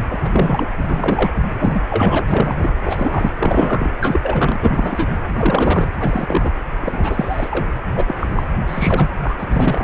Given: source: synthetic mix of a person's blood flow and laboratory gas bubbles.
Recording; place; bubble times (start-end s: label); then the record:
Doppler ultrasound of blood flow; precordium
0.11-0.71 s: bubbles
0.82-1.32 s: bubbles
1.54-1.84 s: bubbles
1.90-2.25 s: bubbles
2.28-2.73 s: bubbles
2.85-3.31 s: bubbles
3.39-3.89 s: bubbles
4.00-4.20 s: bubbles
4.23-5.09 s: bubbles
5.30-5.88 s: bubbles
6.00-6.52 s: bubbles
6.81-7.67 s: bubbles
7.96-8.49 s: bubbles
8.67-9.11 s: bubbles
9.22-9.45 s: bubbles
9.49-9.84 s: bubbles
From the record:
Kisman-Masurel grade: 343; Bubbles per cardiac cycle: rolling drumbeat, 9 or more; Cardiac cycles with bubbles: 100%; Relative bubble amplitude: loud (0.450 to 0.775); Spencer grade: 3 (all of the cardiac periods contain showers or single bubble signals, but not dominating or overriding the cardiac motion signals); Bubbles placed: anywhere in the cardiac cycle